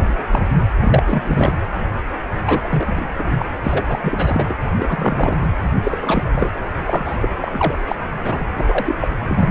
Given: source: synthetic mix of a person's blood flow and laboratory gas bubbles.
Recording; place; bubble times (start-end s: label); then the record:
Doppler ultrasound of blood flow; precordium
0.00-0.24 s: bubbles
0.31-0.46 s: bubbles
0.82-1.03 s: bubbles
1.05-1.54 s: bubbles
2.44-3.46 s: bubbles
3.65-3.86 s: bubbles
3.88-3.99 s: bubbles
4.03-4.55 s: bubbles
4.66-4.71 s: bubbles
4.77-5.37 s: bubbles
5.41-5.54 s: bubbles
5.83-6.24 s: bubbles
6.35-6.54 s: bubbles
6.86-7.17 s: bubbles
7.20-7.29 s: bubbles
7.42-7.78 s: bubbles
7.87-7.96 s: bubbles
8.18-8.46 s: bubbles
8.55-8.96 s: bubbles
8.99-9.08 s: bubbles
9.20-9.49 s: bubbles
From the record:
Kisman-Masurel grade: 343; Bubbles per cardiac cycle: rolling drumbeat, 9 or more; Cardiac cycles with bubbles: 100%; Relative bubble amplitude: loud (0.450 to 0.775); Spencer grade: 3 (all of the cardiac periods contain showers or single bubble signals, but not dominating or overriding the cardiac motion signals); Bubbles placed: anywhere in the cardiac cycle